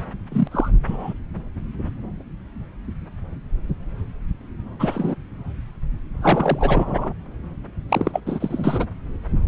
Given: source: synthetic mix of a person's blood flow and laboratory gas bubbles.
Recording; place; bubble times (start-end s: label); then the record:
Doppler ultrasound of blood flow; subclavian vein
0.32-0.47 s: bubbles
0.51-0.69 s: bubbles
0.84-1.14 s: bubbles
4.79-5.15 s: bubbles
6.21-7.10 s: bubbles
7.89-8.21 s: bubbles
8.26-8.86 s: bubbles
From the record:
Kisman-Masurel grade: 222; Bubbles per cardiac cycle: several, 3 to 8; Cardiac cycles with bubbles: 10 to 50%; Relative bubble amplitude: moderate (0.250 to 0.450); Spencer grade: 2 (many but less than half of the cardiac periods contain bubble signals, singularly or in groups); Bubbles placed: anywhere in the cardiac cycle